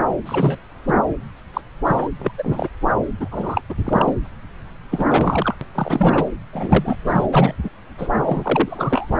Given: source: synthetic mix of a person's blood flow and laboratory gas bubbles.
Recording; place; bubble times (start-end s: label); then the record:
Doppler ultrasound of blood flow; subclavian vein
0.26-0.58 s: bubbles
0.88-0.94 s: bubbles
1.53-1.61 s: bubbles
1.85-2.09 s: bubbles
2.19-2.32 s: bubbles
2.38-2.68 s: bubbles
3.20-3.62 s: bubbles
3.68-3.75 s: bubbles
3.85-4.13 s: bubbles
4.91-5.54 s: bubbles
5.61-5.66 s: bubbles
5.75-6.27 s: bubbles
6.53-6.96 s: bubbles
7.06-7.26 s: bubbles
7.33-7.54 s: bubbles
7.63-7.70 s: bubbles
7.97-8.09 s: bubbles
8.25-9.11 s: bubbles
From the record:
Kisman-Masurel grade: 243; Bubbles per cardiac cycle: several, 3 to 8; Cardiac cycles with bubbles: 100%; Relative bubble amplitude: loud (0.450 to 0.775); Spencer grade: 3 (all of the cardiac periods contain showers or single bubble signals, but not dominating or overriding the cardiac motion signals); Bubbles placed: anywhere in the cardiac cycle